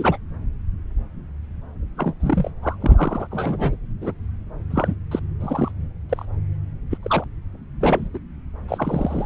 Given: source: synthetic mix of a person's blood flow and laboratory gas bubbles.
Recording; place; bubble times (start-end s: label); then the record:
Doppler ultrasound of blood flow; subclavian vein
0.00-0.17 s: bubbles
1.97-2.14 s: bubbles
2.20-2.50 s: bubbles
2.62-2.76 s: bubbles
2.80-3.27 s: bubbles
3.30-3.75 s: bubbles
4.01-4.12 s: bubbles
4.70-4.94 s: bubbles
5.11-5.19 s: bubbles
5.40-5.71 s: bubbles
6.09-6.25 s: bubbles
6.91-6.97 s: bubbles
7.02-7.24 s: bubbles
7.80-8.08 s: bubbles
8.13-8.18 s: bubbles
8.68-9.26 s: bubbles
From the record:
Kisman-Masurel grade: 242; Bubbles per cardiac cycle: several, 3 to 8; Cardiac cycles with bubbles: 100%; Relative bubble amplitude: moderate (0.250 to 0.450); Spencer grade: 3 (all of the cardiac periods contain showers or single bubble signals, but not dominating or overriding the cardiac motion signals); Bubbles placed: anywhere in the cardiac cycle